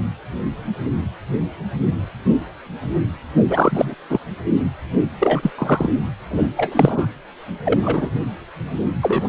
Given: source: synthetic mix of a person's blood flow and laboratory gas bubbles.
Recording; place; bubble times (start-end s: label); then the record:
Doppler ultrasound of blood flow; precordium
3.48-3.94 s: bubbles
4.09-4.20 s: bubbles
5.19-5.51 s: bubbles
5.58-5.89 s: bubbles
6.30-6.48 s: bubbles
6.56-7.05 s: bubbles
7.64-8.10 s: bubbles
9.02-9.28 s: bubbles
From the record:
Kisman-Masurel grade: 223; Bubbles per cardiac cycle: several, 3 to 8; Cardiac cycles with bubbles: 10 to 50%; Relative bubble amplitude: loud (0.450 to 0.775); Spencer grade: 2 (many but less than half of the cardiac periods contain bubble signals, singularly or in groups); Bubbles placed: anywhere in the cardiac cycle